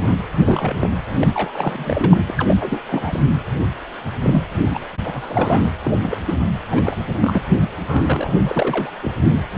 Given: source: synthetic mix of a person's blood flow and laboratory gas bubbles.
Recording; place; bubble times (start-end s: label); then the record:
Doppler ultrasound of blood flow; precordium
0.00-0.16 s: bubbles
0.45-0.90 s: bubbles
1.21-1.27 s: bubbles
1.33-2.25 s: bubbles
2.27-2.34 s: bubbles
2.38-2.56 s: bubbles
2.60-2.83 s: bubbles
2.88-3.22 s: bubbles
4.22-4.42 s: bubbles
4.73-4.79 s: bubbles
5.04-5.68 s: bubbles
5.82-6.17 s: bubbles
6.25-6.35 s: bubbles
6.71-6.96 s: bubbles
7.07-7.12 s: bubbles
7.20-7.42 s: bubbles
7.87-8.91 s: bubbles
9.02-9.11 s: bubbles
From the record:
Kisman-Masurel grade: 342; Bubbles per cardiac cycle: rolling drumbeat, 9 or more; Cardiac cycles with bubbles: 100%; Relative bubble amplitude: moderate (0.250 to 0.450); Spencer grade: 3 (all of the cardiac periods contain showers or single bubble signals, but not dominating or overriding the cardiac motion signals); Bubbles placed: anywhere in the cardiac cycle